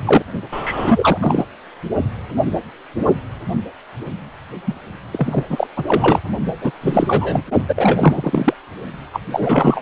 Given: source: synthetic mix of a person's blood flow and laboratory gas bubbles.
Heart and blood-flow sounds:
Doppler ultrasound of blood flow; precordium
0.05-0.22 s: bubbles
0.51-1.18 s: bubbles
1.21-1.45 s: bubbles
4.67-4.74 s: bubbles
5.12-5.44 s: bubbles
5.50-5.67 s: bubbles
5.76-5.83 s: bubbles
5.87-6.20 s: bubbles
6.61-6.72 s: bubbles
6.82-7.42 s: bubbles
7.68-8.54 s: bubbles
9.13-9.20 s: bubbles
9.32-9.81 s: bubbles
From the record:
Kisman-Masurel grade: 333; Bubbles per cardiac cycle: rolling drumbeat, 9 or more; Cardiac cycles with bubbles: 50 to 99%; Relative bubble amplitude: loud (0.450 to 0.775); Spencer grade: 3 (all of the cardiac periods contain showers or single bubble signals, but not dominating or overriding the cardiac motion signals); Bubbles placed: only in the low amplitude regions of the cardiac cycle

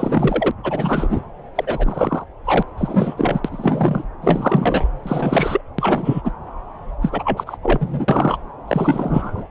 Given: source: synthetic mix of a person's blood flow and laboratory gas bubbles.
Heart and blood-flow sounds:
Doppler ultrasound of blood flow; subclavian vein
0.00-0.52 s: bubbles
0.63-1.21 s: bubbles
1.55-2.24 s: bubbles
2.44-2.63 s: bubbles
2.77-3.40 s: bubbles
3.44-4.04 s: bubbles
4.21-4.88 s: bubbles
5.03-5.62 s: bubbles
5.78-6.21 s: bubbles
6.24-6.31 s: bubbles
7.01-7.58 s: bubbles
7.62-8.38 s: bubbles
8.68-9.48 s: bubbles
From the record:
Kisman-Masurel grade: 333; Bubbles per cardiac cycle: rolling drumbeat, 9 or more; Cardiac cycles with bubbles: 50 to 99%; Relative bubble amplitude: loud (0.450 to 0.775); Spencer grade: 3 (all of the cardiac periods contain showers or single bubble signals, but not dominating or overriding the cardiac motion signals); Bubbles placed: anywhere in the cardiac cycle

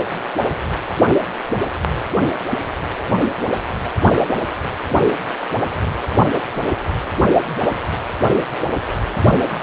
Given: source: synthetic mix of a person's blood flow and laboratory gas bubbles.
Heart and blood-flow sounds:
Doppler ultrasound of blood flow; precordium
2.50-2.59 s: bubbles
From the record:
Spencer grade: 1 (occasional bubble signal discernible with the cardiac motion signal, with majority of cardiac periods free of bubbles); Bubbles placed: only in the low amplitude regions of the cardiac cycle

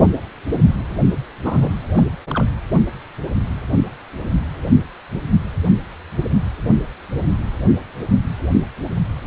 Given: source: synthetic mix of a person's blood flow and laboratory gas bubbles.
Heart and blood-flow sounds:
Doppler ultrasound of blood flow; precordium
1.44-1.69 s: bubbles
1.93-2.05 s: bubbles
2.29-2.44 s: bubbles
From the record:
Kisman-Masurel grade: 212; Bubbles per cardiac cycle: several, 3 to 8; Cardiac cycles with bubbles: 1 to 10%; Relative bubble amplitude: moderate (0.250 to 0.450); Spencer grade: 1 (occasional bubble signal discernible with the cardiac motion signal, with majority of cardiac periods free of bubbles); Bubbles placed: only in the low amplitude regions of the cardiac cycle

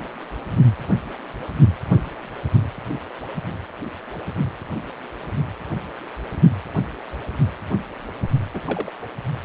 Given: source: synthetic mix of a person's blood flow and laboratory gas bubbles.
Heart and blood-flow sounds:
Doppler ultrasound of blood flow; precordium
8.54-8.62 s: bubbles
8.67-8.91 s: bubbles
9.00-9.07 s: bubbles
From the record:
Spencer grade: 1 (occasional bubble signal discernible with the cardiac motion signal, with majority of cardiac periods free of bubbles); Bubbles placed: only in the low amplitude regions of the cardiac cycle

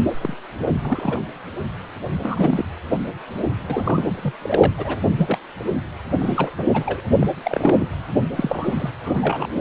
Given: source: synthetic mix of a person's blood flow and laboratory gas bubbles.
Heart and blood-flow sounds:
Doppler ultrasound of blood flow; precordium
0.21-0.37 s: bubbles
0.81-1.23 s: bubbles
2.23-2.74 s: bubbles
3.69-4.37 s: bubbles
4.42-4.73 s: bubbles
4.77-4.97 s: bubbles
5.03-5.08 s: bubbles
5.18-5.38 s: bubbles
5.57-5.64 s: bubbles
6.20-6.52 s: bubbles
6.58-6.64 s: bubbles
6.74-7.00 s: bubbles
7.19-7.27 s: bubbles
7.44-7.88 s: bubbles
8.37-8.89 s: bubbles
9.04-9.47 s: bubbles
From the record:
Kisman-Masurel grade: 242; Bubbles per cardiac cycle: several, 3 to 8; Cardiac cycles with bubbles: 100%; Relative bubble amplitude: moderate (0.250 to 0.450); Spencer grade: 3 (all of the cardiac periods contain showers or single bubble signals, but not dominating or overriding the cardiac motion signals); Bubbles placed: anywhere in the cardiac cycle

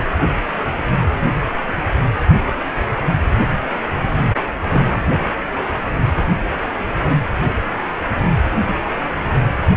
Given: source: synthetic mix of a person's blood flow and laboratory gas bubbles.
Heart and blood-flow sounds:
Doppler ultrasound of blood flow; precordium
4.62-5.00 s: bubbles
5.11-5.18 s: bubbles
From the record:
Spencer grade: 1 (occasional bubble signal discernible with the cardiac motion signal, with majority of cardiac periods free of bubbles); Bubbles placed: anywhere in the cardiac cycle

